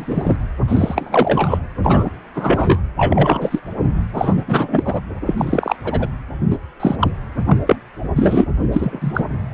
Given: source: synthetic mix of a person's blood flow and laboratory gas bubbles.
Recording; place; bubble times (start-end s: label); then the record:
Doppler ultrasound of blood flow; precordium
0.00-0.36 s: bubbles
0.68-1.58 s: bubbles
1.83-2.09 s: bubbles
2.35-2.79 s: bubbles
2.96-3.59 s: bubbles
4.13-5.00 s: bubbles
5.26-5.34 s: bubbles
5.38-5.76 s: bubbles
5.84-6.08 s: bubbles
6.50-6.57 s: bubbles
6.79-6.96 s: bubbles
7.00-7.11 s: bubbles
7.38-7.43 s: bubbles
7.46-7.58 s: bubbles
7.67-7.76 s: bubbles
8.16-8.46 s: bubbles
8.72-9.27 s: bubbles
From the record:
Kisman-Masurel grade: 243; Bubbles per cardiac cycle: several, 3 to 8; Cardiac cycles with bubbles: 100%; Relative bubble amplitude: loud (0.450 to 0.775); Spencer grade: 3 (all of the cardiac periods contain showers or single bubble signals, but not dominating or overriding the cardiac motion signals); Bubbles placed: anywhere in the cardiac cycle